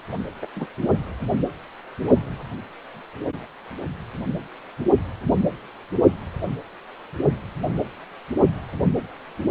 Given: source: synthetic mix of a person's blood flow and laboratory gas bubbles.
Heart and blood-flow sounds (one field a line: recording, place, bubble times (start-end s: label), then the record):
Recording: Doppler ultrasound of blood flow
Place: precordium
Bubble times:
0.42-0.46 s: bubbles
0.56-0.67 s: bubbles
From the record:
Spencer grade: 1 (occasional bubble signal discernible with the cardiac motion signal, with majority of cardiac periods free of bubbles)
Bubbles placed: only in the low amplitude regions of the cardiac cycle